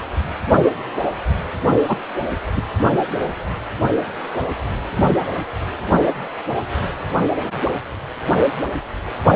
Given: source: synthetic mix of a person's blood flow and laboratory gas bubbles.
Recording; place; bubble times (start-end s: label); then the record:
Doppler ultrasound of blood flow; precordium
1.88-1.97 s: bubbles
2.56-2.62 s: bubbles
From the record:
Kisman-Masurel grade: 123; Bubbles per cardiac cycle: 1 to 2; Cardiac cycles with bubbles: 10 to 50%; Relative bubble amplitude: loud (0.450 to 0.775); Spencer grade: 2 (many but less than half of the cardiac periods contain bubble signals, singularly or in groups); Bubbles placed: only in the low amplitude regions of the cardiac cycle